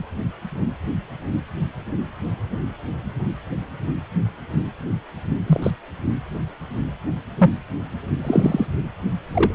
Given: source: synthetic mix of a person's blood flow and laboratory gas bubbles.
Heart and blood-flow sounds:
Doppler ultrasound of blood flow; precordium
5.46-5.71 s: bubbles
7.38-7.50 s: bubbles
8.24-8.66 s: bubbles
9.33-9.51 s: bubbles
From the record:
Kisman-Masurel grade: 122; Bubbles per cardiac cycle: 1 to 2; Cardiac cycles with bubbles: 10 to 50%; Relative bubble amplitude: moderate (0.250 to 0.450); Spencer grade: 2 (many but less than half of the cardiac periods contain bubble signals, singularly or in groups); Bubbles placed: only in the low amplitude regions of the cardiac cycle

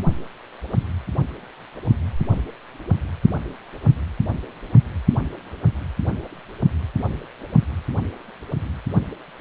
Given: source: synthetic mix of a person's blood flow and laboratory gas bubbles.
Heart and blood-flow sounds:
Doppler ultrasound of blood flow; precordium
no bubbles
From the record:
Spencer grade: 0 (complete lack of bubble signals)

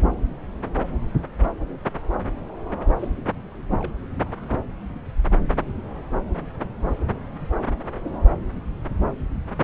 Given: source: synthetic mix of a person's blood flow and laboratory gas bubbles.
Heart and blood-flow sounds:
Doppler ultrasound of blood flow; subclavian vein
2.99-3.08 s: bubbles
3.78-3.97 s: bubbles
From the record:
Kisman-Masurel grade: 121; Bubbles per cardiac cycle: 1 to 2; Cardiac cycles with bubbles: 10 to 50%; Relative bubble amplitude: barely perceptible (0.100 to 0.250); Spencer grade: 2 (many but less than half of the cardiac periods contain bubble signals, singularly or in groups); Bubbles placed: anywhere in the cardiac cycle

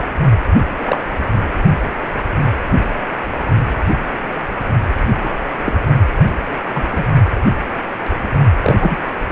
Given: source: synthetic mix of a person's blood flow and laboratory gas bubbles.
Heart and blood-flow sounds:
Doppler ultrasound of blood flow; precordium
0.00-0.04 s: bubbles
0.78-1.00 s: bubbles
5.24-5.31 s: bubbles
5.65-5.73 s: bubbles
6.73-7.04 s: bubbles
8.63-8.76 s: bubbles
8.80-8.98 s: bubbles
From the record:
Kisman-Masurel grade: 123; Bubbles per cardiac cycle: 1 to 2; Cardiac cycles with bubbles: 10 to 50%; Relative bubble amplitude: loud (0.450 to 0.775); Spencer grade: 2 (many but less than half of the cardiac periods contain bubble signals, singularly or in groups); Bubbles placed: only in the low amplitude regions of the cardiac cycle

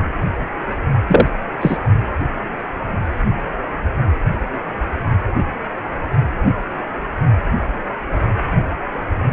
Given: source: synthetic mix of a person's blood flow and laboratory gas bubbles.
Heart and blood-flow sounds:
Doppler ultrasound of blood flow; precordium
1.08-1.27 s: bubbles
1.61-1.78 s: bubbles
From the record:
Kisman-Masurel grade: 213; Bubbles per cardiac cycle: several, 3 to 8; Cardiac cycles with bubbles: 1 to 10%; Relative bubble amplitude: loud (0.450 to 0.775); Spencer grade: 1 (occasional bubble signal discernible with the cardiac motion signal, with majority of cardiac periods free of bubbles); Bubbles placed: only in the low amplitude regions of the cardiac cycle

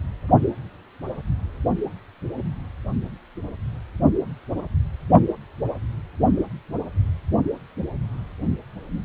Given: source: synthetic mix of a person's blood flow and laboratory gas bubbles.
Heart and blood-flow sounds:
Doppler ultrasound of blood flow; precordium
no bubbles
From the record:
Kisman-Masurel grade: 000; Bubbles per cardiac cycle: 0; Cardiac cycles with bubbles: 0%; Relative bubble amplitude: no bubbles discernible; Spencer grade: 0 (complete lack of bubble signals)

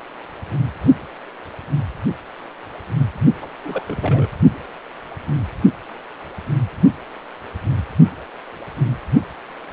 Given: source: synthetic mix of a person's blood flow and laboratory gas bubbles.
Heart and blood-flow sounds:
Doppler ultrasound of blood flow; precordium
3.42-3.48 s: bubbles
3.62-3.83 s: bubbles
3.87-4.27 s: bubbles
From the record:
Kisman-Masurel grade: 211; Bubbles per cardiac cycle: several, 3 to 8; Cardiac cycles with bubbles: 1 to 10%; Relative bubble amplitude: barely perceptible (0.100 to 0.250); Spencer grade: 1 (occasional bubble signal discernible with the cardiac motion signal, with majority of cardiac periods free of bubbles); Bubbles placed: only in the low amplitude regions of the cardiac cycle

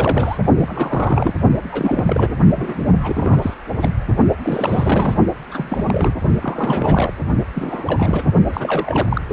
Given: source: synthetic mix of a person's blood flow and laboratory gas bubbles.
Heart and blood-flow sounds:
Doppler ultrasound of blood flow; precordium
0.00-0.38 s: bubbles
0.57-1.33 s: bubbles
1.71-2.35 s: bubbles
2.55-2.93 s: bubbles
3.01-3.54 s: bubbles
3.80-3.90 s: bubbles
4.43-5.15 s: bubbles
5.51-6.14 s: bubbles
6.41-7.13 s: bubbles
7.53-8.33 s: bubbles
8.47-9.21 s: bubbles
From the record:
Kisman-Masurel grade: 342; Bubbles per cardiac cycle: rolling drumbeat, 9 or more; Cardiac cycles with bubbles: 100%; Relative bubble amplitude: moderate (0.250 to 0.450); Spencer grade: 3 (all of the cardiac periods contain showers or single bubble signals, but not dominating or overriding the cardiac motion signals); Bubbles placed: only in the low amplitude regions of the cardiac cycle

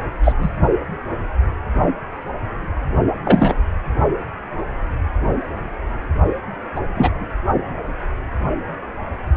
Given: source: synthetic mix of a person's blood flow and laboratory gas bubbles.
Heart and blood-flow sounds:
Doppler ultrasound of blood flow; precordium
0.23-0.33 s: bubbles
0.38-0.50 s: bubbles
3.25-3.56 s: bubbles
6.75-6.80 s: bubbles
6.94-7.28 s: bubbles
From the record:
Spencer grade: 3 (all of the cardiac periods contain showers or single bubble signals, but not dominating or overriding the cardiac motion signals); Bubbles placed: only in the low amplitude regions of the cardiac cycle

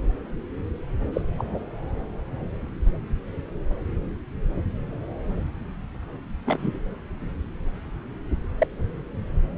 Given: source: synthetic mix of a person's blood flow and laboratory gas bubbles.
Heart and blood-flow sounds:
Doppler ultrasound of blood flow; subclavian vein
1.13-1.21 s: bubbles
1.38-1.59 s: bubbles
6.46-6.79 s: bubbles
8.58-8.67 s: bubbles
From the record:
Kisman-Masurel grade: 122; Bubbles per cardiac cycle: 1 to 2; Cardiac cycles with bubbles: 10 to 50%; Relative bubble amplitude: moderate (0.250 to 0.450); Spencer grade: 2 (many but less than half of the cardiac periods contain bubble signals, singularly or in groups); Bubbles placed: anywhere in the cardiac cycle

